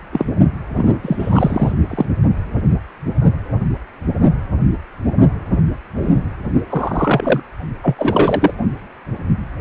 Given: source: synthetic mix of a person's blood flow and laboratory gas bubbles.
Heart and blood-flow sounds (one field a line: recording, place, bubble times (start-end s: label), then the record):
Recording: Doppler ultrasound of blood flow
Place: precordium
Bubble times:
0.12-0.26 s: bubbles
0.75-1.72 s: bubbles
1.90-2.05 s: bubbles
6.70-7.42 s: bubbles
7.83-7.95 s: bubbles
7.98-8.55 s: bubbles
From the record:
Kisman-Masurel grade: 223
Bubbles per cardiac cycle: several, 3 to 8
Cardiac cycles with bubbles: 10 to 50%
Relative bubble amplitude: loud (0.450 to 0.775)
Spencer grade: 2 (many but less than half of the cardiac periods contain bubble signals, singularly or in groups)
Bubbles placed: only in the low amplitude regions of the cardiac cycle